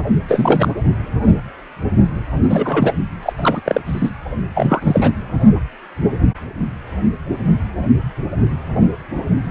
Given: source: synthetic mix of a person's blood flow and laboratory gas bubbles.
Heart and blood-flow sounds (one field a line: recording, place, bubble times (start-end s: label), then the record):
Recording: Doppler ultrasound of blood flow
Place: precordium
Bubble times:
0.28-0.72 s: bubbles
2.49-2.95 s: bubbles
3.23-3.33 s: bubbles
3.38-3.61 s: bubbles
3.65-3.80 s: bubbles
3.86-4.10 s: bubbles
4.55-5.10 s: bubbles
From the record:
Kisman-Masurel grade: 223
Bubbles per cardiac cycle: several, 3 to 8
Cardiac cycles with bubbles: 10 to 50%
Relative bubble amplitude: loud (0.450 to 0.775)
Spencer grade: 2 (many but less than half of the cardiac periods contain bubble signals, singularly or in groups)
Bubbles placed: anywhere in the cardiac cycle